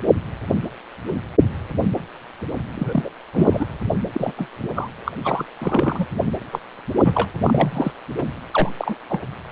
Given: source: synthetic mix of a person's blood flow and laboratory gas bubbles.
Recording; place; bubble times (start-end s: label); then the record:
Doppler ultrasound of blood flow; precordium
2.75-3.12 s: bubbles
3.33-3.67 s: bubbles
4.14-4.32 s: bubbles
4.37-4.49 s: bubbles
4.62-4.69 s: bubbles
4.76-4.89 s: bubbles
5.06-5.12 s: bubbles
5.24-5.45 s: bubbles
5.59-6.06 s: bubbles
6.52-6.59 s: bubbles
7.05-7.31 s: bubbles
7.43-7.92 s: bubbles
8.18-8.22 s: bubbles
8.51-8.70 s: bubbles
8.78-8.96 s: bubbles
9.09-9.21 s: bubbles
From the record:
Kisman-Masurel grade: 232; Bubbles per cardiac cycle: several, 3 to 8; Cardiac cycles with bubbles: 50 to 99%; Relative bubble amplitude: moderate (0.250 to 0.450); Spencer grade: 3 (all of the cardiac periods contain showers or single bubble signals, but not dominating or overriding the cardiac motion signals); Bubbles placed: anywhere in the cardiac cycle